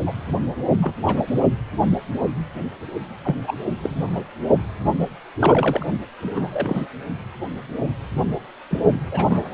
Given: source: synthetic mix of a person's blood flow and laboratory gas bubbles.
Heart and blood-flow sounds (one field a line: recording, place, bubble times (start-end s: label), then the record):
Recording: Doppler ultrasound of blood flow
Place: precordium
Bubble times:
0.06-0.12 s: bubbles
0.77-0.93 s: bubbles
1.06-1.21 s: bubbles
3.25-3.35 s: bubbles
3.47-3.55 s: bubbles
3.82-4.26 s: bubbles
5.38-5.86 s: bubbles
6.21-6.87 s: bubbles
8.71-8.79 s: bubbles
9.11-9.54 s: bubbles
From the record:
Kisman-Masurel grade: 232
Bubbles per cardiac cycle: several, 3 to 8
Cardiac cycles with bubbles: 50 to 99%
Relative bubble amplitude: moderate (0.250 to 0.450)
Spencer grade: 3 (all of the cardiac periods contain showers or single bubble signals, but not dominating or overriding the cardiac motion signals)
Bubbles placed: only in the low amplitude regions of the cardiac cycle